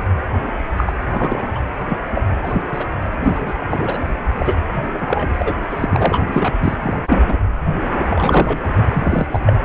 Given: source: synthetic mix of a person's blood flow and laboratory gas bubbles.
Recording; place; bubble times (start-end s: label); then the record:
Doppler ultrasound of blood flow; precordium
0.77-0.93 s: bubbles
1.11-1.45 s: bubbles
1.54-1.59 s: bubbles
1.86-1.98 s: bubbles
2.15-2.25 s: bubbles
2.43-2.62 s: bubbles
2.73-2.85 s: bubbles
3.23-3.60 s: bubbles
3.69-3.99 s: bubbles
4.36-4.59 s: bubbles
5.00-5.53 s: bubbles
5.69-6.26 s: bubbles
6.32-6.53 s: bubbles
6.60-6.96 s: bubbles
7.07-7.37 s: bubbles
7.91-8.85 s: bubbles
8.94-9.27 s: bubbles
9.30-9.39 s: bubbles
9.46-9.54 s: bubbles
From the record:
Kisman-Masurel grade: 333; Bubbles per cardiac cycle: rolling drumbeat, 9 or more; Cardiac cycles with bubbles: 50 to 99%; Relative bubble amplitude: loud (0.450 to 0.775); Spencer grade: 3 (all of the cardiac periods contain showers or single bubble signals, but not dominating or overriding the cardiac motion signals); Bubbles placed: anywhere in the cardiac cycle